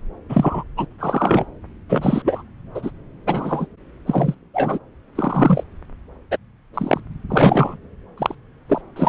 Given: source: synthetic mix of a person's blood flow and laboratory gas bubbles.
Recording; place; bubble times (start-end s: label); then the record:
Doppler ultrasound of blood flow; subclavian vein
0.29-0.64 s: bubbles
0.77-0.86 s: bubbles
1.01-1.45 s: bubbles
1.89-2.43 s: bubbles
2.74-2.90 s: bubbles
3.26-3.66 s: bubbles
4.06-4.34 s: bubbles
4.54-4.79 s: bubbles
5.15-5.63 s: bubbles
6.31-6.37 s: bubbles
6.73-7.00 s: bubbles
7.29-7.77 s: bubbles
8.18-8.35 s: bubbles
8.68-8.82 s: bubbles
8.96-9.09 s: bubbles
From the record:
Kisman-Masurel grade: 243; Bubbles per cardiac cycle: several, 3 to 8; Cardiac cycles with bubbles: 100%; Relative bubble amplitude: loud (0.450 to 0.775); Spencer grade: 3 (all of the cardiac periods contain showers or single bubble signals, but not dominating or overriding the cardiac motion signals); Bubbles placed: anywhere in the cardiac cycle